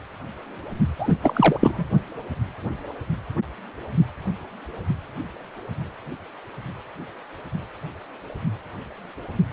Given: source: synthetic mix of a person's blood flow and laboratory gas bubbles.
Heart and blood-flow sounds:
Doppler ultrasound of blood flow; precordium
0.99-1.13 s: bubbles
1.22-1.85 s: bubbles
From the record:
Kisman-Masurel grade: 223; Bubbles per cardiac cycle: several, 3 to 8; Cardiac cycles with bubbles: 10 to 50%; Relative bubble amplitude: loud (0.450 to 0.775); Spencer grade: 2 (many but less than half of the cardiac periods contain bubble signals, singularly or in groups); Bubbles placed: only in the low amplitude regions of the cardiac cycle

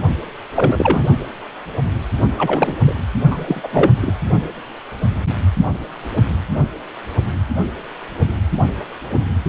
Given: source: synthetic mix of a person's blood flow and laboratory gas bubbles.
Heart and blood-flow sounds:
Doppler ultrasound of blood flow; precordium
0.52-1.05 s: bubbles
2.38-2.77 s: bubbles
2.87-2.94 s: bubbles
3.30-3.68 s: bubbles
3.72-3.91 s: bubbles
4.02-4.14 s: bubbles
From the record:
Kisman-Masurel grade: 233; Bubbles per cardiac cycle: several, 3 to 8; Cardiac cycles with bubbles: 50 to 99%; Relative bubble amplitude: loud (0.450 to 0.775); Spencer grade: 3 (all of the cardiac periods contain showers or single bubble signals, but not dominating or overriding the cardiac motion signals); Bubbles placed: only in the low amplitude regions of the cardiac cycle

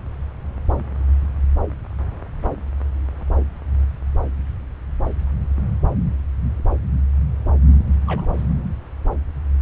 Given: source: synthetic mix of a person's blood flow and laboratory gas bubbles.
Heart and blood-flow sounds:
Doppler ultrasound of blood flow; subclavian vein
8.07-8.27 s: bubbles
8.33-8.44 s: bubbles
From the record:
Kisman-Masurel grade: 211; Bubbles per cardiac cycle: several, 3 to 8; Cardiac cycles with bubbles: 1 to 10%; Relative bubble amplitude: barely perceptible (0.100 to 0.250); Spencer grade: 1 (occasional bubble signal discernible with the cardiac motion signal, with majority of cardiac periods free of bubbles); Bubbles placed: anywhere in the cardiac cycle

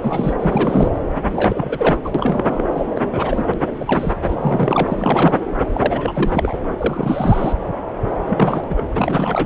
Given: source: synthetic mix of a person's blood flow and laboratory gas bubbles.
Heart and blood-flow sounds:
Doppler ultrasound of blood flow; subclavian vein
0.00-0.33 s: bubbles
0.40-0.89 s: bubbles
0.91-0.99 s: bubbles
1.30-1.97 s: bubbles
2.04-2.12 s: bubbles
2.14-2.63 s: bubbles
2.75-2.87 s: bubbles
2.95-3.04 s: bubbles
3.12-3.46 s: bubbles
3.54-3.60 s: bubbles
3.66-4.12 s: bubbles
4.22-5.38 s: bubbles
5.67-6.56 s: bubbles
6.77-7.53 s: bubbles
8.29-8.88 s: bubbles
8.95-9.46 s: bubbles
From the record:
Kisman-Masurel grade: 333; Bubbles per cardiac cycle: rolling drumbeat, 9 or more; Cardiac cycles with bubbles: 50 to 99%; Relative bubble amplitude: loud (0.450 to 0.775); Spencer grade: 3 (all of the cardiac periods contain showers or single bubble signals, but not dominating or overriding the cardiac motion signals); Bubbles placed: anywhere in the cardiac cycle

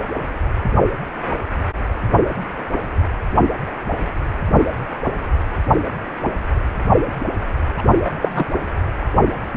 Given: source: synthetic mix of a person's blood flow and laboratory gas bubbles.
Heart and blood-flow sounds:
Doppler ultrasound of blood flow; precordium
7.77-7.83 s: bubbles
8.04-8.11 s: bubbles
8.21-8.46 s: bubbles
From the record:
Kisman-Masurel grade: 213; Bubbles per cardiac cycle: several, 3 to 8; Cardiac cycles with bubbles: 1 to 10%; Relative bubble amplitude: loud (0.450 to 0.775); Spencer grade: 1 (occasional bubble signal discernible with the cardiac motion signal, with majority of cardiac periods free of bubbles); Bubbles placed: anywhere in the cardiac cycle

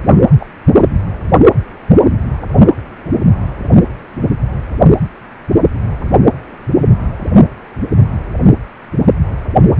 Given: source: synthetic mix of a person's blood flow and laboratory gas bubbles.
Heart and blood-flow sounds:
Doppler ultrasound of blood flow; precordium
0.40-0.45 s: bubbles
0.77-0.83 s: bubbles
From the record:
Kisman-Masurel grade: 112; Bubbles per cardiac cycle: 1 to 2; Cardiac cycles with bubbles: 1 to 10%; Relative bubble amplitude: moderate (0.250 to 0.450); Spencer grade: 1 (occasional bubble signal discernible with the cardiac motion signal, with majority of cardiac periods free of bubbles); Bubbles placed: only in the low amplitude regions of the cardiac cycle

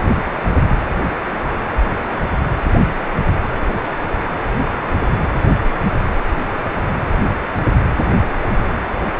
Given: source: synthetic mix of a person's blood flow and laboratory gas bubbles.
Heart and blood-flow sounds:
Doppler ultrasound of blood flow; precordium
no bubbles
From the record:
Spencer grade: 0 (complete lack of bubble signals)

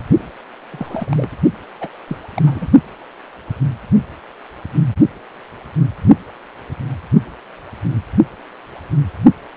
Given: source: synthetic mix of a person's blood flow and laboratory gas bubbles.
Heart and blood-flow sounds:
Doppler ultrasound of blood flow; precordium
0.18-0.29 s: bubbles
0.70-1.30 s: bubbles
1.81-1.89 s: bubbles
2.07-2.17 s: bubbles
2.34-2.42 s: bubbles
2.46-2.67 s: bubbles
From the record:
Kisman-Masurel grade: 221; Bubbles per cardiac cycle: several, 3 to 8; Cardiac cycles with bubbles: 10 to 50%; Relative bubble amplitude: barely perceptible (0.100 to 0.250); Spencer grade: 2 (many but less than half of the cardiac periods contain bubble signals, singularly or in groups); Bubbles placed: only in the low amplitude regions of the cardiac cycle

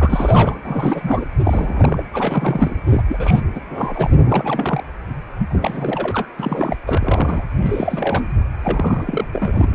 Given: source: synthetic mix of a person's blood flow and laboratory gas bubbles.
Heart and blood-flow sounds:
Doppler ultrasound of blood flow; precordium
0.00-0.58 s: bubbles
0.64-1.26 s: bubbles
1.43-2.02 s: bubbles
2.13-2.80 s: bubbles
2.90-3.02 s: bubbles
3.07-3.41 s: bubbles
3.55-3.61 s: bubbles
3.69-4.10 s: bubbles
4.29-4.83 s: bubbles
5.49-6.28 s: bubbles
6.39-6.75 s: bubbles
6.87-7.45 s: bubbles
7.61-8.23 s: bubbles
8.62-9.25 s: bubbles
9.33-9.75 s: bubbles
From the record:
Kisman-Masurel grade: 342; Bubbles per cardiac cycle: rolling drumbeat, 9 or more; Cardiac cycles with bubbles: 100%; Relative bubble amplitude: moderate (0.250 to 0.450); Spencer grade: 3 (all of the cardiac periods contain showers or single bubble signals, but not dominating or overriding the cardiac motion signals); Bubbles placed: anywhere in the cardiac cycle

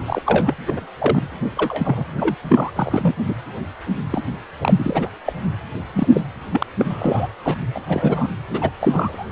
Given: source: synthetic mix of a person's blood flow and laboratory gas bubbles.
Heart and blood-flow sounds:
Doppler ultrasound of blood flow; precordium
0.07-0.22 s: bubbles
0.26-0.54 s: bubbles
0.67-0.81 s: bubbles
0.99-1.23 s: bubbles
1.56-2.05 s: bubbles
2.17-2.35 s: bubbles
2.44-2.71 s: bubbles
2.75-3.15 s: bubbles
3.28-3.35 s: bubbles
4.12-4.22 s: bubbles
4.59-5.08 s: bubbles
5.25-5.33 s: bubbles
5.93-6.07 s: bubbles
6.12-6.21 s: bubbles
6.51-6.67 s: bubbles
6.79-6.85 s: bubbles
6.89-7.29 s: bubbles
7.43-7.55 s: bubbles
7.74-7.79 s: bubbles
7.88-8.28 s: bubbles
8.50-8.70 s: bubbles
8.80-9.27 s: bubbles
From the record:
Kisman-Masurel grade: 242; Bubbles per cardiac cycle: several, 3 to 8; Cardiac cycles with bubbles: 100%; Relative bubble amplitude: moderate (0.250 to 0.450); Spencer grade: 3 (all of the cardiac periods contain showers or single bubble signals, but not dominating or overriding the cardiac motion signals); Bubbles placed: anywhere in the cardiac cycle

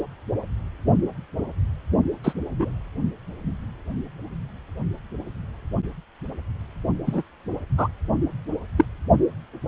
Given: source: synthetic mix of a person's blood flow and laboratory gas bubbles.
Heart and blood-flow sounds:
Doppler ultrasound of blood flow; precordium
2.23-2.33 s: bubbles
2.58-2.73 s: bubbles
7.06-7.23 s: bubbles
7.78-7.88 s: bubbles
8.77-8.85 s: bubbles
From the record:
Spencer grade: 2 (many but less than half of the cardiac periods contain bubble signals, singularly or in groups); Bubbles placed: only in the low amplitude regions of the cardiac cycle

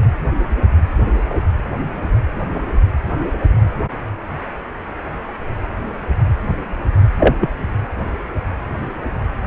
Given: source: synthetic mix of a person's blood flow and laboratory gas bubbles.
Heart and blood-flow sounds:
Doppler ultrasound of blood flow; precordium
7.19-7.35 s: bubbles
7.40-7.49 s: bubbles
From the record:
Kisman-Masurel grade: 113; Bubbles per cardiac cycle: 1 to 2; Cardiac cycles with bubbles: 1 to 10%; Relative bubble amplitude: loud (0.450 to 0.775); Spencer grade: 1 (occasional bubble signal discernible with the cardiac motion signal, with majority of cardiac periods free of bubbles); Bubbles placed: anywhere in the cardiac cycle

